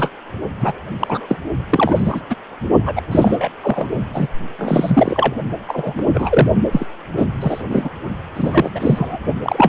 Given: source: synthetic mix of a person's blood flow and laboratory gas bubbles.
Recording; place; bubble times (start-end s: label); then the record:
Doppler ultrasound of blood flow; precordium
0.00-0.10 s: bubbles
0.60-0.73 s: bubbles
0.99-1.36 s: bubbles
1.70-2.21 s: bubbles
2.29-2.35 s: bubbles
2.85-3.02 s: bubbles
3.11-3.49 s: bubbles
3.62-3.87 s: bubbles
4.13-4.28 s: bubbles
4.58-5.34 s: bubbles
5.68-5.94 s: bubbles
5.97-6.03 s: bubbles
6.14-6.49 s: bubbles
6.71-6.87 s: bubbles
7.17-7.25 s: bubbles
7.41-7.63 s: bubbles
7.70-7.89 s: bubbles
8.34-8.71 s: bubbles
8.74-9.18 s: bubbles
9.42-9.68 s: bubbles
From the record:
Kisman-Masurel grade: 243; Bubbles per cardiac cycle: several, 3 to 8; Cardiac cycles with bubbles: 100%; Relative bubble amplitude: loud (0.450 to 0.775); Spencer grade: 3 (all of the cardiac periods contain showers or single bubble signals, but not dominating or overriding the cardiac motion signals); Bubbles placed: only in the low amplitude regions of the cardiac cycle